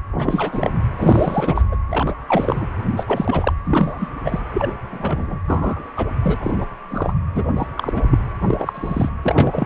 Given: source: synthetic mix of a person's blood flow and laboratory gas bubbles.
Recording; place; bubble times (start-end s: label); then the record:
Doppler ultrasound of blood flow; precordium
0.18-0.79 s: bubbles
0.98-1.62 s: bubbles
1.72-1.76 s: bubbles
1.89-2.14 s: bubbles
2.28-2.66 s: bubbles
2.96-3.04 s: bubbles
3.07-3.53 s: bubbles
3.65-4.10 s: bubbles
4.25-4.40 s: bubbles
4.53-4.72 s: bubbles
4.90-5.40 s: bubbles
5.47-5.83 s: bubbles
5.96-6.07 s: bubbles
6.23-6.36 s: bubbles
6.40-6.65 s: bubbles
6.89-7.13 s: bubbles
7.34-7.44 s: bubbles
7.56-7.67 s: bubbles
7.75-7.93 s: bubbles
7.96-8.02 s: bubbles
8.11-8.19 s: bubbles
8.45-9.12 s: bubbles
9.23-9.66 s: bubbles
From the record:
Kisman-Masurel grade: 242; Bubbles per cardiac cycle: several, 3 to 8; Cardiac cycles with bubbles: 100%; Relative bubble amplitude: moderate (0.250 to 0.450); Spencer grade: 3 (all of the cardiac periods contain showers or single bubble signals, but not dominating or overriding the cardiac motion signals); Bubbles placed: anywhere in the cardiac cycle